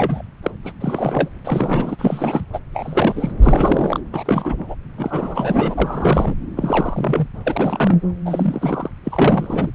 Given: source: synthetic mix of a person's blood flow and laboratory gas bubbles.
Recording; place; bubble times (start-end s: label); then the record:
Doppler ultrasound of blood flow; subclavian vein
0.00-0.22 s: bubbles
0.42-0.51 s: bubbles
0.64-0.72 s: bubbles
0.80-1.29 s: bubbles
1.45-2.45 s: bubbles
2.53-2.59 s: bubbles
2.74-3.33 s: bubbles
3.42-3.99 s: bubbles
4.12-4.75 s: bubbles
4.97-6.35 s: bubbles
6.57-7.27 s: bubbles
7.46-8.01 s: bubbles
8.25-8.89 s: bubbles
9.04-9.71 s: bubbles
From the record:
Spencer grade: 3 (all of the cardiac periods contain showers or single bubble signals, but not dominating or overriding the cardiac motion signals); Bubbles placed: anywhere in the cardiac cycle